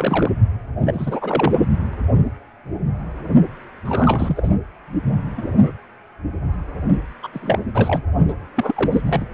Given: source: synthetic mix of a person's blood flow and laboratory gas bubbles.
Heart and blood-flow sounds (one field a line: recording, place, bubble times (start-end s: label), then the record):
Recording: Doppler ultrasound of blood flow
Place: precordium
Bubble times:
0.00-0.31 s: bubbles
0.80-1.66 s: bubbles
3.85-4.50 s: bubbles
5.37-5.71 s: bubbles
7.22-7.27 s: bubbles
7.33-7.59 s: bubbles
7.74-8.03 s: bubbles
8.28-8.33 s: bubbles
8.56-9.01 s: bubbles
9.04-9.25 s: bubbles
From the record:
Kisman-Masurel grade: 332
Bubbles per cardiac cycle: rolling drumbeat, 9 or more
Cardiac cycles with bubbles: 50 to 99%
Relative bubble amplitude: moderate (0.250 to 0.450)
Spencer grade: 3 (all of the cardiac periods contain showers or single bubble signals, but not dominating or overriding the cardiac motion signals)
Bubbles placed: anywhere in the cardiac cycle